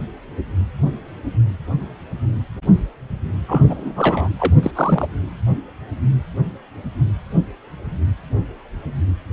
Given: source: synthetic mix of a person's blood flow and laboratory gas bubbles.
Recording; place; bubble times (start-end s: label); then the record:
Doppler ultrasound of blood flow; precordium
3.48-3.64 s: bubbles
3.67-4.29 s: bubbles
4.38-4.54 s: bubbles
4.62-4.71 s: bubbles
4.75-5.08 s: bubbles
From the record:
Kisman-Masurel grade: 222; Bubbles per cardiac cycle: several, 3 to 8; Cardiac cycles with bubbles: 10 to 50%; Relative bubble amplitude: moderate (0.250 to 0.450); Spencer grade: 2 (many but less than half of the cardiac periods contain bubble signals, singularly or in groups); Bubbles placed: anywhere in the cardiac cycle